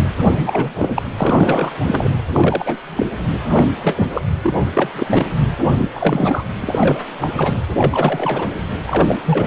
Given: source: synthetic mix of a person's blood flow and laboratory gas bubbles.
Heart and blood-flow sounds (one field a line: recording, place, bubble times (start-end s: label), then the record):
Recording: Doppler ultrasound of blood flow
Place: precordium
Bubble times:
0.30-0.70 s: bubbles
0.78-1.02 s: bubbles
1.18-1.72 s: bubbles
1.86-2.10 s: bubbles
2.33-2.77 s: bubbles
2.96-3.08 s: bubbles
3.43-3.68 s: bubbles
3.75-4.23 s: bubbles
4.42-4.67 s: bubbles
4.74-5.27 s: bubbles
5.77-5.88 s: bubbles
5.94-6.45 s: bubbles
6.60-6.99 s: bubbles
7.19-7.60 s: bubbles
7.77-8.49 s: bubbles
8.87-9.20 s: bubbles
9.25-9.46 s: bubbles
From the record:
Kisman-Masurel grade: 343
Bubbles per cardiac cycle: rolling drumbeat, 9 or more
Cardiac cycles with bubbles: 100%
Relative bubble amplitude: loud (0.450 to 0.775)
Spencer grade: 3 (all of the cardiac periods contain showers or single bubble signals, but not dominating or overriding the cardiac motion signals)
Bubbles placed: anywhere in the cardiac cycle